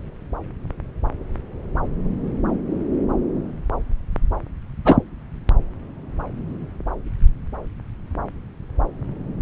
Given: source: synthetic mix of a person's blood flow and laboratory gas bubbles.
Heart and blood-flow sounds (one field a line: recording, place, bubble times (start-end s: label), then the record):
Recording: Doppler ultrasound of blood flow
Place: subclavian vein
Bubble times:
4.85-4.96 s: bubbles
From the record:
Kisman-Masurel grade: 212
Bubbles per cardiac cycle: several, 3 to 8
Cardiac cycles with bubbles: 1 to 10%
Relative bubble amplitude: moderate (0.250 to 0.450)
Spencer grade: 1 (occasional bubble signal discernible with the cardiac motion signal, with majority of cardiac periods free of bubbles)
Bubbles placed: anywhere in the cardiac cycle